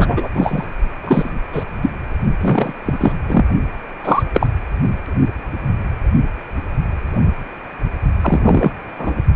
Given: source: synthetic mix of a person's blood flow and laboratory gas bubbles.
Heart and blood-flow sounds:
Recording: Doppler ultrasound of blood flow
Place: precordium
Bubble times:
0.00-0.28 s: bubbles
0.34-0.65 s: bubbles
1.04-1.30 s: bubbles
1.52-1.65 s: bubbles
1.82-1.90 s: bubbles
2.41-2.73 s: bubbles
2.85-3.13 s: bubbles
3.27-3.44 s: bubbles
4.04-4.23 s: bubbles
4.33-4.47 s: bubbles
8.21-8.71 s: bubbles
8.98-9.12 s: bubbles
From the record:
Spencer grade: 3 (all of the cardiac periods contain showers or single bubble signals, but not dominating or overriding the cardiac motion signals)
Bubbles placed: only in the low amplitude regions of the cardiac cycle

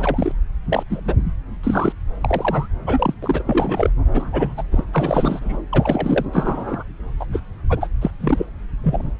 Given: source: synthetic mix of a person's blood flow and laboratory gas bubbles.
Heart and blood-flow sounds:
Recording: Doppler ultrasound of blood flow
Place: subclavian vein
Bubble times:
0.00-0.32 s: bubbles
0.70-0.83 s: bubbles
0.90-1.01 s: bubbles
1.05-1.16 s: bubbles
1.63-1.92 s: bubbles
2.21-2.68 s: bubbles
2.87-3.14 s: bubbles
3.23-3.43 s: bubbles
3.46-3.90 s: bubbles
4.13-4.63 s: bubbles
4.71-4.84 s: bubbles
4.92-5.62 s: bubbles
5.72-6.25 s: bubbles
6.33-6.83 s: bubbles
7.20-7.25 s: bubbles
7.33-7.39 s: bubbles
7.70-7.88 s: bubbles
8.01-8.11 s: bubbles
8.20-8.46 s: bubbles
8.83-9.11 s: bubbles
From the record:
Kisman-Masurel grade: 242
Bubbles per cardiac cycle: several, 3 to 8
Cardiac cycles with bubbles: 100%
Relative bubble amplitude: moderate (0.250 to 0.450)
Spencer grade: 3 (all of the cardiac periods contain showers or single bubble signals, but not dominating or overriding the cardiac motion signals)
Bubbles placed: anywhere in the cardiac cycle

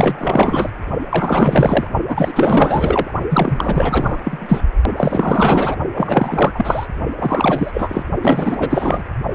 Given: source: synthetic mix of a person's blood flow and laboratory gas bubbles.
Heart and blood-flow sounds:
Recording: Doppler ultrasound of blood flow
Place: precordium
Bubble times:
0.00-0.70 s: bubbles
1.10-1.87 s: bubbles
2.07-2.32 s: bubbles
2.35-3.11 s: bubbles
3.29-4.62 s: bubbles
4.97-5.77 s: bubbles
5.93-6.88 s: bubbles
7.18-8.03 s: bubbles
8.21-9.03 s: bubbles
From the record:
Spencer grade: 4 (maximum detectable bubble signal sounding continuously throughout systole and diastole of every cardiac period, and overriding the amplitude of the normal cardiac signals)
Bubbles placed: only in the low amplitude regions of the cardiac cycle

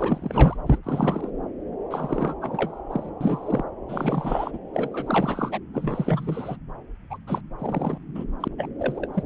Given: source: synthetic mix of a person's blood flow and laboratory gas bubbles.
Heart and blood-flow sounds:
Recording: Doppler ultrasound of blood flow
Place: subclavian vein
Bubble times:
0.00-0.56 s: bubbles
0.66-0.78 s: bubbles
0.83-1.30 s: bubbles
1.91-2.35 s: bubbles
2.41-2.81 s: bubbles
2.90-3.10 s: bubbles
3.21-3.64 s: bubbles
3.89-4.58 s: bubbles
4.73-5.58 s: bubbles
5.73-6.56 s: bubbles
7.10-7.17 s: bubbles
7.27-7.41 s: bubbles
7.58-7.98 s: bubbles
8.15-8.25 s: bubbles
8.40-8.48 s: bubbles
8.58-8.67 s: bubbles
8.79-9.07 s: bubbles
9.14-9.23 s: bubbles
From the record:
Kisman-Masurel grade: 342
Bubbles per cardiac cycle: rolling drumbeat, 9 or more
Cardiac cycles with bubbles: 100%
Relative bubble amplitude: moderate (0.250 to 0.450)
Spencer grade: 3 (all of the cardiac periods contain showers or single bubble signals, but not dominating or overriding the cardiac motion signals)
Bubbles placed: anywhere in the cardiac cycle

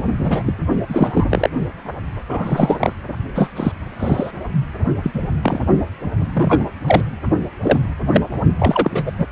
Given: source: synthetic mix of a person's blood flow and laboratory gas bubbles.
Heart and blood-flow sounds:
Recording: Doppler ultrasound of blood flow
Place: precordium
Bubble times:
0.23-0.42 s: bubbles
0.46-0.53 s: bubbles
0.89-1.50 s: bubbles
2.29-2.92 s: bubbles
3.34-3.50 s: bubbles
3.56-3.72 s: bubbles
3.99-4.30 s: bubbles
5.03-5.11 s: bubbles
5.13-5.20 s: bubbles
5.43-5.64 s: bubbles
6.33-6.64 s: bubbles
6.86-7.01 s: bubbles
7.63-7.79 s: bubbles
8.13-8.21 s: bubbles
8.59-9.12 s: bubbles
9.18-9.26 s: bubbles
From the record:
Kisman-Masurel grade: 233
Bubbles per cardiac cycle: several, 3 to 8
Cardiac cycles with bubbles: 50 to 99%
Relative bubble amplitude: loud (0.450 to 0.775)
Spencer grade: 3 (all of the cardiac periods contain showers or single bubble signals, but not dominating or overriding the cardiac motion signals)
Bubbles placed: only in the low amplitude regions of the cardiac cycle

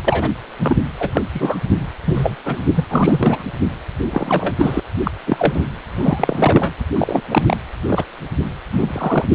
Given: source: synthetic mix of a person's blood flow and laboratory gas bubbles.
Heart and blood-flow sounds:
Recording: Doppler ultrasound of blood flow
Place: precordium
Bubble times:
0.04-0.30 s: bubbles
0.59-0.78 s: bubbles
0.99-1.10 s: bubbles
1.14-1.22 s: bubbles
1.34-1.58 s: bubbles
1.66-1.86 s: bubbles
2.05-2.36 s: bubbles
2.46-2.65 s: bubbles
2.75-2.84 s: bubbles
2.90-3.43 s: bubbles
4.10-4.55 s: bubbles
4.58-4.80 s: bubbles
5.04-5.11 s: bubbles
5.27-5.61 s: bubbles
5.96-6.73 s: bubbles
6.95-7.23 s: bubbles
7.30-7.57 s: bubbles
7.88-8.04 s: bubbles
8.69-9.26 s: bubbles
From the record:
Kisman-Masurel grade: 243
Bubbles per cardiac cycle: several, 3 to 8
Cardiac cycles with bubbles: 100%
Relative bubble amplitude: loud (0.450 to 0.775)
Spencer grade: 3 (all of the cardiac periods contain showers or single bubble signals, but not dominating or overriding the cardiac motion signals)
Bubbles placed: anywhere in the cardiac cycle

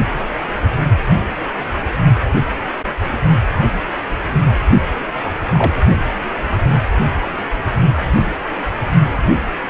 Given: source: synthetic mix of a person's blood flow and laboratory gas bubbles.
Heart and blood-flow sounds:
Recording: Doppler ultrasound of blood flow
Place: precordium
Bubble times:
5.53-5.75 s: bubbles
From the record:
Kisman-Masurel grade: 122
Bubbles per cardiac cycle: 1 to 2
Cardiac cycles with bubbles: 10 to 50%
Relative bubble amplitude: moderate (0.250 to 0.450)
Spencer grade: 2 (many but less than half of the cardiac periods contain bubble signals, singularly or in groups)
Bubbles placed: only in the low amplitude regions of the cardiac cycle

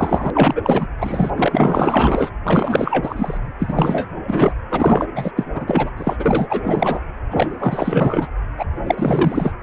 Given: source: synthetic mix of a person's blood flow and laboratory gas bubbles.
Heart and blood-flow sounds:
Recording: Doppler ultrasound of blood flow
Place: precordium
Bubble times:
0.00-0.30 s: bubbles
0.33-0.88 s: bubbles
0.98-1.30 s: bubbles
1.36-2.30 s: bubbles
2.44-3.38 s: bubbles
3.59-4.09 s: bubbles
4.27-4.52 s: bubbles
4.70-5.06 s: bubbles
5.16-5.31 s: bubbles
5.35-5.44 s: bubbles
5.54-5.91 s: bubbles
5.96-6.17 s: bubbles
6.19-6.46 s: bubbles
6.49-7.00 s: bubbles
7.30-8.28 s: bubbles
8.57-8.64 s: bubbles
8.87-9.53 s: bubbles
From the record:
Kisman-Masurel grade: 444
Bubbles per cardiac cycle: continuous sound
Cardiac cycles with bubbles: 100%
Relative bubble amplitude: maximal (0.775 to 0.999)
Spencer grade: 4 (maximum detectable bubble signal sounding continuously throughout systole and diastole of every cardiac period, and overriding the amplitude of the normal cardiac signals)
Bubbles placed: anywhere in the cardiac cycle

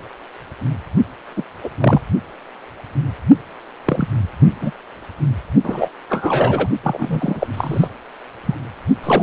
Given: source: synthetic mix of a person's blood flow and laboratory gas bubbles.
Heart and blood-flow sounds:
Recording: Doppler ultrasound of blood flow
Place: precordium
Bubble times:
1.36-1.43 s: bubbles
1.64-1.69 s: bubbles
1.80-2.01 s: bubbles
3.85-4.08 s: bubbles
4.61-4.71 s: bubbles
5.63-5.88 s: bubbles
6.09-6.70 s: bubbles
6.83-7.47 s: bubbles
7.56-7.88 s: bubbles
8.46-8.55 s: bubbles
9.04-9.23 s: bubbles
From the record:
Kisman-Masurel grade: 233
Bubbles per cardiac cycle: several, 3 to 8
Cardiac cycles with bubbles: 50 to 99%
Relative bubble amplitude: loud (0.450 to 0.775)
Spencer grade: 3 (all of the cardiac periods contain showers or single bubble signals, but not dominating or overriding the cardiac motion signals)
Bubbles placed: only in the low amplitude regions of the cardiac cycle

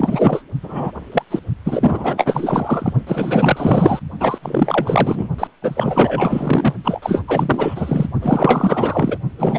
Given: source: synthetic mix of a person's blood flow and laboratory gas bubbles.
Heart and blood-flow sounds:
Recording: Doppler ultrasound of blood flow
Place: precordium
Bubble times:
0.00-0.42 s: bubbles
0.62-0.92 s: bubbles
1.11-1.23 s: bubbles
1.30-1.39 s: bubbles
1.64-2.93 s: bubbles
3.07-4.00 s: bubbles
4.20-4.38 s: bubbles
4.42-5.29 s: bubbles
5.38-5.48 s: bubbles
5.62-6.74 s: bubbles
6.84-7.22 s: bubbles
7.28-8.06 s: bubbles
8.21-9.18 s: bubbles
9.38-9.59 s: bubbles
From the record:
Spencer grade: 4 (maximum detectable bubble signal sounding continuously throughout systole and diastole of every cardiac period, and overriding the amplitude of the normal cardiac signals)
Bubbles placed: only in the low amplitude regions of the cardiac cycle

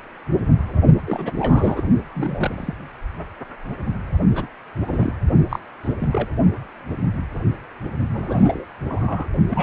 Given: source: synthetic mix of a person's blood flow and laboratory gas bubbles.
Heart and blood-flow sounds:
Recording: Doppler ultrasound of blood flow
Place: precordium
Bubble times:
1.06-1.32 s: bubbles
1.39-1.83 s: bubbles
2.14-2.74 s: bubbles
4.34-4.46 s: bubbles
4.85-5.13 s: bubbles
5.49-5.59 s: bubbles
5.83-5.92 s: bubbles
6.01-6.08 s: bubbles
6.11-6.27 s: bubbles
8.13-8.65 s: bubbles
8.84-9.29 s: bubbles
9.50-9.63 s: bubbles
From the record:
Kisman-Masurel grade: 232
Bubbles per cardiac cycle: several, 3 to 8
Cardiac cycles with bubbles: 50 to 99%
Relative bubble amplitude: moderate (0.250 to 0.450)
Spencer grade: 3 (all of the cardiac periods contain showers or single bubble signals, but not dominating or overriding the cardiac motion signals)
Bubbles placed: only in the low amplitude regions of the cardiac cycle

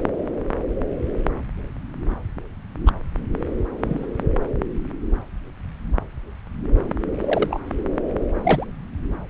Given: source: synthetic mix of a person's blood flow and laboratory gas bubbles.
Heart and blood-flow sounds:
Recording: Doppler ultrasound of blood flow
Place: subclavian vein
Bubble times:
2.85-2.92 s: bubbles
3.81-4.07 s: bubbles
7.21-7.60 s: bubbles
8.43-8.66 s: bubbles
From the record:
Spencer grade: 2 (many but less than half of the cardiac periods contain bubble signals, singularly or in groups)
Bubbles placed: anywhere in the cardiac cycle

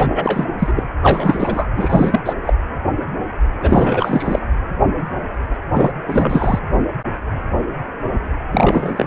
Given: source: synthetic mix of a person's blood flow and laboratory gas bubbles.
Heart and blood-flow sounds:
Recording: Doppler ultrasound of blood flow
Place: precordium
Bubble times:
0.00-0.47 s: bubbles
0.58-0.73 s: bubbles
0.76-0.89 s: bubbles
1.02-1.67 s: bubbles
1.76-2.20 s: bubbles
2.25-2.33 s: bubbles
2.46-2.54 s: bubbles
3.60-4.39 s: bubbles
5.74-5.92 s: bubbles
6.07-6.59 s: bubbles
8.52-9.07 s: bubbles
From the record:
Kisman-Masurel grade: 333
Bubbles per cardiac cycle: rolling drumbeat, 9 or more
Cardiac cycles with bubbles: 50 to 99%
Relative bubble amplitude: loud (0.450 to 0.775)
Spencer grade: 3 (all of the cardiac periods contain showers or single bubble signals, but not dominating or overriding the cardiac motion signals)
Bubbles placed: anywhere in the cardiac cycle

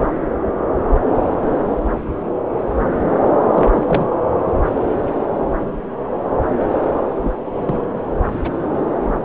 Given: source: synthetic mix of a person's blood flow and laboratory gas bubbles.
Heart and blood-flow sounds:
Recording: Doppler ultrasound of blood flow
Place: subclavian vein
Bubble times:
3.53-4.05 s: bubbles
7.21-7.32 s: bubbles
7.61-7.87 s: bubbles
7.95-8.01 s: bubbles
8.29-8.39 s: bubbles
8.43-8.49 s: bubbles
From the record:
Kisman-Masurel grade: 222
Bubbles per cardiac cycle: several, 3 to 8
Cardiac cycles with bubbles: 10 to 50%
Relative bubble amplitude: moderate (0.250 to 0.450)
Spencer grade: 2 (many but less than half of the cardiac periods contain bubble signals, singularly or in groups)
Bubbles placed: anywhere in the cardiac cycle

